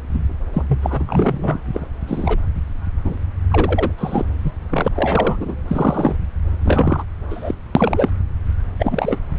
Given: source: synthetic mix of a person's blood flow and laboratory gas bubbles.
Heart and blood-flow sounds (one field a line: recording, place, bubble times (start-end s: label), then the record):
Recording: Doppler ultrasound of blood flow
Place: subclavian vein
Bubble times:
0.12-0.19 s: bubbles
0.53-0.62 s: bubbles
0.68-0.79 s: bubbles
0.82-1.03 s: bubbles
1.07-1.63 s: bubbles
1.72-1.86 s: bubbles
2.07-2.38 s: bubbles
3.04-3.18 s: bubbles
3.51-3.91 s: bubbles
3.97-4.25 s: bubbles
4.43-4.51 s: bubbles
4.69-4.88 s: bubbles
4.94-5.55 s: bubbles
5.67-6.15 s: bubbles
6.62-7.04 s: bubbles
7.30-7.54 s: bubbles
7.75-8.10 s: bubbles
8.79-9.17 s: bubbles
From the record:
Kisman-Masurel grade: 243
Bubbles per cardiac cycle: several, 3 to 8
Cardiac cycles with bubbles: 100%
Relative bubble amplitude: loud (0.450 to 0.775)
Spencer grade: 3 (all of the cardiac periods contain showers or single bubble signals, but not dominating or overriding the cardiac motion signals)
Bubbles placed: anywhere in the cardiac cycle